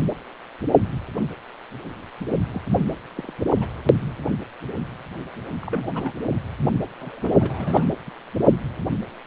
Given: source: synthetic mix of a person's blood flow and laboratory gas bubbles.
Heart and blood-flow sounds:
Doppler ultrasound of blood flow; precordium
2.51-2.61 s: bubbles
3.17-3.33 s: bubbles
3.60-3.67 s: bubbles
5.62-6.13 s: bubbles
6.99-7.91 s: bubbles
8.07-8.11 s: bubbles
From the record:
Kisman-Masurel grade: 221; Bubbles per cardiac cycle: several, 3 to 8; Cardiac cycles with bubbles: 10 to 50%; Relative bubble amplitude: barely perceptible (0.100 to 0.250); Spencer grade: 2 (many but less than half of the cardiac periods contain bubble signals, singularly or in groups); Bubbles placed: only in the low amplitude regions of the cardiac cycle

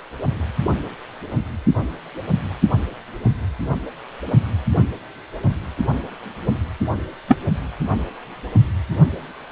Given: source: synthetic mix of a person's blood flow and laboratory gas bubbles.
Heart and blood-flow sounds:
Doppler ultrasound of blood flow; precordium
7.28-7.37 s: bubbles
From the record:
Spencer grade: 1 (occasional bubble signal discernible with the cardiac motion signal, with majority of cardiac periods free of bubbles); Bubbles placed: only in the low amplitude regions of the cardiac cycle

